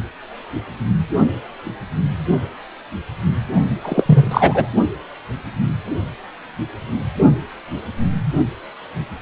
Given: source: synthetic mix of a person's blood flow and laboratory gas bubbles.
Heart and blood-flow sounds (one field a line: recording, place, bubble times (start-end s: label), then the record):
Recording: Doppler ultrasound of blood flow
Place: precordium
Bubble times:
3.82-4.71 s: bubbles
From the record:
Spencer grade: 1 (occasional bubble signal discernible with the cardiac motion signal, with majority of cardiac periods free of bubbles)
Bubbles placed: only in the low amplitude regions of the cardiac cycle